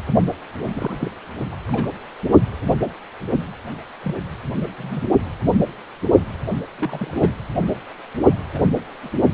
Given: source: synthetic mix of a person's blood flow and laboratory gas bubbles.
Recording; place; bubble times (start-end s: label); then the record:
Doppler ultrasound of blood flow; precordium
0.73-1.10 s: bubbles
1.52-1.57 s: bubbles
1.68-1.90 s: bubbles
4.04-4.16 s: bubbles
4.63-4.67 s: bubbles
4.78-5.03 s: bubbles
6.77-7.30 s: bubbles
8.54-8.62 s: bubbles
9.02-9.11 s: bubbles
From the record:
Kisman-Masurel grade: 221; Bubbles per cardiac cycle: several, 3 to 8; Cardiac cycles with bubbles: 10 to 50%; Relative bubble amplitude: barely perceptible (0.100 to 0.250); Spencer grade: 2 (many but less than half of the cardiac periods contain bubble signals, singularly or in groups); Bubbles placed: anywhere in the cardiac cycle